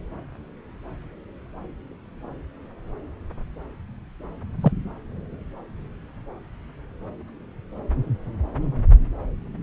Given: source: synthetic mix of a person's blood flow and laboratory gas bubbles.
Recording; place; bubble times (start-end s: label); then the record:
Doppler ultrasound of blood flow; subclavian vein
4.62-4.71 s: bubbles
From the record:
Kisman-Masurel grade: 113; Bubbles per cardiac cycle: 1 to 2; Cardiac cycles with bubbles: 1 to 10%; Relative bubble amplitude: loud (0.450 to 0.775); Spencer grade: 1 (occasional bubble signal discernible with the cardiac motion signal, with majority of cardiac periods free of bubbles); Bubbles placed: anywhere in the cardiac cycle